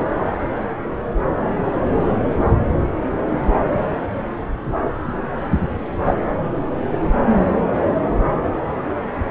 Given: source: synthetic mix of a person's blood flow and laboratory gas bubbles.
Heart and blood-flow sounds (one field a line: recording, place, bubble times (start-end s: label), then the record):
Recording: Doppler ultrasound of blood flow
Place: subclavian vein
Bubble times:
6.04-6.14 s: bubbles
From the record:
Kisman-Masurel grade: 113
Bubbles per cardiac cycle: 1 to 2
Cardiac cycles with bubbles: 1 to 10%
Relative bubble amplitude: loud (0.450 to 0.775)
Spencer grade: 1 (occasional bubble signal discernible with the cardiac motion signal, with majority of cardiac periods free of bubbles)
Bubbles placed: anywhere in the cardiac cycle